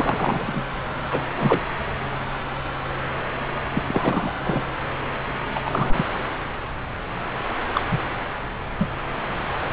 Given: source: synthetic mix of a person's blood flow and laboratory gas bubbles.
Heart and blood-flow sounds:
Doppler ultrasound of blood flow; subclavian vein
0.00-0.64 s: bubbles
1.10-1.27 s: bubbles
1.35-1.61 s: bubbles
3.72-3.82 s: bubbles
3.86-4.32 s: bubbles
4.43-4.62 s: bubbles
5.54-5.60 s: bubbles
5.65-6.06 s: bubbles
7.73-7.81 s: bubbles
7.91-7.98 s: bubbles
8.79-8.89 s: bubbles
From the record:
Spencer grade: 3 (all of the cardiac periods contain showers or single bubble signals, but not dominating or overriding the cardiac motion signals); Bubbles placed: anywhere in the cardiac cycle

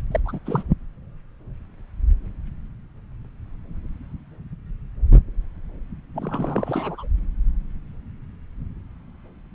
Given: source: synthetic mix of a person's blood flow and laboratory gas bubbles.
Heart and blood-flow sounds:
Doppler ultrasound of blood flow; subclavian vein
0.11-0.20 s: bubbles
0.25-0.39 s: bubbles
0.46-0.63 s: bubbles
6.13-7.07 s: bubbles
From the record:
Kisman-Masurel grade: 221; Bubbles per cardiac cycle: several, 3 to 8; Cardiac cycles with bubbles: 10 to 50%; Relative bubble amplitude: barely perceptible (0.100 to 0.250); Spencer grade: 2 (many but less than half of the cardiac periods contain bubble signals, singularly or in groups); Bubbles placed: anywhere in the cardiac cycle

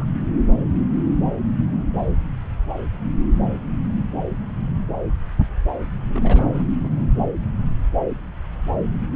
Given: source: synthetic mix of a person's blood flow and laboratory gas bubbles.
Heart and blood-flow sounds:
Doppler ultrasound of blood flow; subclavian vein
0.00-0.04 s: bubbles
6.12-6.65 s: bubbles
6.83-6.90 s: bubbles
From the record:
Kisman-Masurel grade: 221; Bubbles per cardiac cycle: several, 3 to 8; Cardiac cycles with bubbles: 10 to 50%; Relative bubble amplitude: barely perceptible (0.100 to 0.250); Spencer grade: 2 (many but less than half of the cardiac periods contain bubble signals, singularly or in groups); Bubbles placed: anywhere in the cardiac cycle

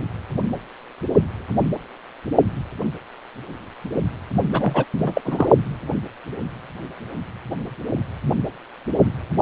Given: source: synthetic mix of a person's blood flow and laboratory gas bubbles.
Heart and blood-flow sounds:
Doppler ultrasound of blood flow; precordium
4.52-4.84 s: bubbles
5.03-5.21 s: bubbles
5.25-5.47 s: bubbles
From the record:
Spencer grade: 1 (occasional bubble signal discernible with the cardiac motion signal, with majority of cardiac periods free of bubbles); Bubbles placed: only in the low amplitude regions of the cardiac cycle

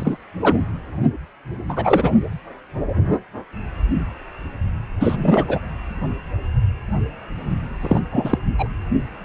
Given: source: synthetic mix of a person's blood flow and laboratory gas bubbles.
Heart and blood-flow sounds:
Doppler ultrasound of blood flow; precordium
0.00-0.19 s: bubbles
0.42-0.59 s: bubbles
1.68-2.12 s: bubbles
5.00-5.59 s: bubbles
7.81-8.00 s: bubbles
8.12-8.39 s: bubbles
8.58-8.68 s: bubbles
From the record:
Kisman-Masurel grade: 223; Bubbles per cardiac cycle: several, 3 to 8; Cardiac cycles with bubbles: 10 to 50%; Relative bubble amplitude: loud (0.450 to 0.775); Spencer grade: 2 (many but less than half of the cardiac periods contain bubble signals, singularly or in groups); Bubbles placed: anywhere in the cardiac cycle

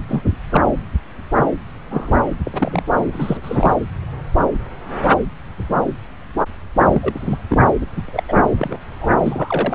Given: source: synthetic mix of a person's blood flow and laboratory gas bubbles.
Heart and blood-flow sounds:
Doppler ultrasound of blood flow; subclavian vein
0.09-0.21 s: bubbles
0.52-0.66 s: bubbles
1.90-2.20 s: bubbles
2.45-2.83 s: bubbles
3.12-3.38 s: bubbles
3.43-3.75 s: bubbles
6.90-7.38 s: bubbles
7.48-7.63 s: bubbles
7.96-8.03 s: bubbles
8.08-8.23 s: bubbles
8.28-8.33 s: bubbles
8.58-8.79 s: bubbles
9.00-9.12 s: bubbles
9.21-9.75 s: bubbles
From the record:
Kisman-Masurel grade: 232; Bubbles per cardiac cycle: several, 3 to 8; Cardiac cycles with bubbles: 50 to 99%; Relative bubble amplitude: moderate (0.250 to 0.450); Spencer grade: 3 (all of the cardiac periods contain showers or single bubble signals, but not dominating or overriding the cardiac motion signals); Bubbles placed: anywhere in the cardiac cycle

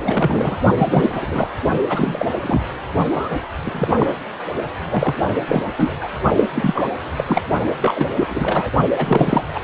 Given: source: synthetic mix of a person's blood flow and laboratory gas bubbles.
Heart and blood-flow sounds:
Doppler ultrasound of blood flow; precordium
0.02-0.59 s: bubbles
0.78-1.53 s: bubbles
1.89-2.26 s: bubbles
2.40-2.66 s: bubbles
3.08-3.39 s: bubbles
3.62-4.07 s: bubbles
4.89-5.33 s: bubbles
5.48-5.63 s: bubbles
5.78-5.94 s: bubbles
6.00-6.10 s: bubbles
6.36-6.48 s: bubbles
6.54-6.88 s: bubbles
7.16-7.42 s: bubbles
7.81-8.71 s: bubbles
8.96-9.49 s: bubbles
9.54-9.60 s: bubbles
From the record:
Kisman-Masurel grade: 343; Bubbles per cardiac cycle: rolling drumbeat, 9 or more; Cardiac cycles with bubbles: 100%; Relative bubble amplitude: loud (0.450 to 0.775); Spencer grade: 3 (all of the cardiac periods contain showers or single bubble signals, but not dominating or overriding the cardiac motion signals); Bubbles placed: only in the low amplitude regions of the cardiac cycle

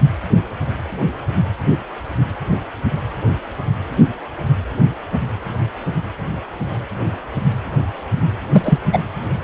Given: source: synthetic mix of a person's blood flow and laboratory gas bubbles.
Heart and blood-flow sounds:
Doppler ultrasound of blood flow; precordium
8.53-8.79 s: bubbles
8.93-8.99 s: bubbles
From the record:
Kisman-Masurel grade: 213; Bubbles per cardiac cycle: several, 3 to 8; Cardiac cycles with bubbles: 1 to 10%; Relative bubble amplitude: loud (0.450 to 0.775); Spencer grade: 1 (occasional bubble signal discernible with the cardiac motion signal, with majority of cardiac periods free of bubbles); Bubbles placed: anywhere in the cardiac cycle

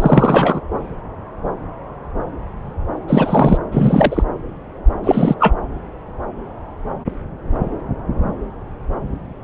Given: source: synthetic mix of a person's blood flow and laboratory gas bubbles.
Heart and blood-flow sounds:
Doppler ultrasound of blood flow; subclavian vein
0.00-0.60 s: bubbles
3.08-3.58 s: bubbles
3.71-4.24 s: bubbles
5.04-5.34 s: bubbles
5.40-5.55 s: bubbles
From the record:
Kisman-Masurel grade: 223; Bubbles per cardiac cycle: several, 3 to 8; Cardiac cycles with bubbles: 10 to 50%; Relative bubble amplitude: loud (0.450 to 0.775); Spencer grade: 2 (many but less than half of the cardiac periods contain bubble signals, singularly or in groups); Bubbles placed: anywhere in the cardiac cycle

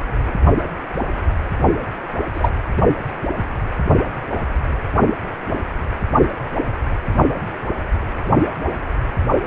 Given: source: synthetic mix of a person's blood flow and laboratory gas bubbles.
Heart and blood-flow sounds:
Doppler ultrasound of blood flow; precordium
2.33-2.50 s: bubbles
From the record:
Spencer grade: 1 (occasional bubble signal discernible with the cardiac motion signal, with majority of cardiac periods free of bubbles); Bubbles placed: only in the low amplitude regions of the cardiac cycle

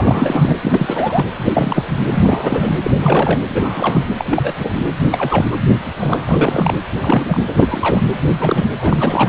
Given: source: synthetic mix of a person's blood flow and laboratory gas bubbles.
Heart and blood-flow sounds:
Doppler ultrasound of blood flow; precordium
0.00-0.55 s: bubbles
0.60-1.28 s: bubbles
1.36-1.85 s: bubbles
2.11-2.73 s: bubbles
2.83-2.92 s: bubbles
2.99-3.39 s: bubbles
3.48-4.05 s: bubbles
4.17-4.54 s: bubbles
4.59-4.82 s: bubbles
5.04-5.45 s: bubbles
5.51-5.57 s: bubbles
5.97-6.80 s: bubbles
7.03-7.44 s: bubbles
7.47-8.04 s: bubbles
8.24-8.36 s: bubbles
8.38-8.70 s: bubbles
8.77-9.29 s: bubbles
From the record:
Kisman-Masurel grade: 342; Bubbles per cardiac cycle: rolling drumbeat, 9 or more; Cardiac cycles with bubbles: 100%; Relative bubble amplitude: moderate (0.250 to 0.450); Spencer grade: 3 (all of the cardiac periods contain showers or single bubble signals, but not dominating or overriding the cardiac motion signals); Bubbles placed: anywhere in the cardiac cycle

